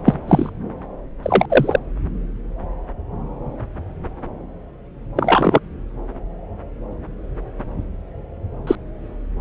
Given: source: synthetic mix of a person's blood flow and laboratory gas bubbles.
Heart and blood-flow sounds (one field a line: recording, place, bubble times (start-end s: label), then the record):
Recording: Doppler ultrasound of blood flow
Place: subclavian vein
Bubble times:
0.05-0.17 s: bubbles
0.28-0.50 s: bubbles
1.22-1.46 s: bubbles
1.50-1.78 s: bubbles
5.16-5.59 s: bubbles
8.67-8.75 s: bubbles
From the record:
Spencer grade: 2 (many but less than half of the cardiac periods contain bubble signals, singularly or in groups)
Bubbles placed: anywhere in the cardiac cycle